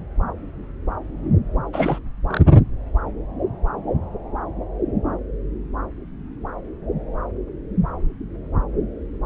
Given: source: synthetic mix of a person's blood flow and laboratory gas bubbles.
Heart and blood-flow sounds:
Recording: Doppler ultrasound of blood flow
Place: subclavian vein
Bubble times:
1.73-1.99 s: bubbles
2.28-2.41 s: bubbles
From the record:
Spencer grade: 1 (occasional bubble signal discernible with the cardiac motion signal, with majority of cardiac periods free of bubbles)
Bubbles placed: anywhere in the cardiac cycle

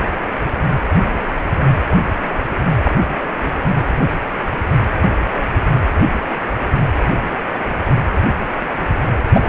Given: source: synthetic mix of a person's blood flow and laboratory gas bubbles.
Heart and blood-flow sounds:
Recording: Doppler ultrasound of blood flow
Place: precordium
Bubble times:
2.84-2.92 s: bubbles
9.33-9.42 s: bubbles
From the record:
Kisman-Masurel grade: 123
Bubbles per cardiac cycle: 1 to 2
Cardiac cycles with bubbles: 10 to 50%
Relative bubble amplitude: loud (0.450 to 0.775)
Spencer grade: 2 (many but less than half of the cardiac periods contain bubble signals, singularly or in groups)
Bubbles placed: anywhere in the cardiac cycle

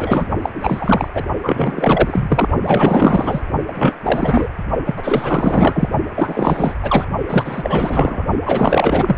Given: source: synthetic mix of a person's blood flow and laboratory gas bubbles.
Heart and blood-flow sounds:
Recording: Doppler ultrasound of blood flow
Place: precordium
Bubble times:
0.00-0.28 s: bubbles
0.41-0.50 s: bubbles
0.54-1.09 s: bubbles
1.14-1.24 s: bubbles
1.43-2.47 s: bubbles
2.62-3.42 s: bubbles
3.67-3.95 s: bubbles
4.03-4.47 s: bubbles
4.85-5.89 s: bubbles
6.14-6.74 s: bubbles
6.82-7.04 s: bubbles
7.26-8.24 s: bubbles
8.45-9.16 s: bubbles
From the record:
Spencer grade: 4 (maximum detectable bubble signal sounding continuously throughout systole and diastole of every cardiac period, and overriding the amplitude of the normal cardiac signals)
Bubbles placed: only in the low amplitude regions of the cardiac cycle

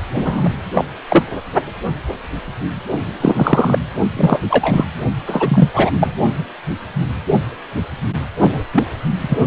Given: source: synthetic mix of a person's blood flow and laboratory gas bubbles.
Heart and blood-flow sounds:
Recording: Doppler ultrasound of blood flow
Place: precordium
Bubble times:
0.15-0.49 s: bubbles
0.72-0.84 s: bubbles
1.09-1.24 s: bubbles
3.21-3.79 s: bubbles
4.17-4.40 s: bubbles
4.50-4.85 s: bubbles
5.27-5.69 s: bubbles
5.74-5.91 s: bubbles
6.00-6.13 s: bubbles
8.73-8.84 s: bubbles
9.21-9.47 s: bubbles
From the record:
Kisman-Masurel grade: 223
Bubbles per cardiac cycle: several, 3 to 8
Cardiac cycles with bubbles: 10 to 50%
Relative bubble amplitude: loud (0.450 to 0.775)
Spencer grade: 2 (many but less than half of the cardiac periods contain bubble signals, singularly or in groups)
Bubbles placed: only in the low amplitude regions of the cardiac cycle

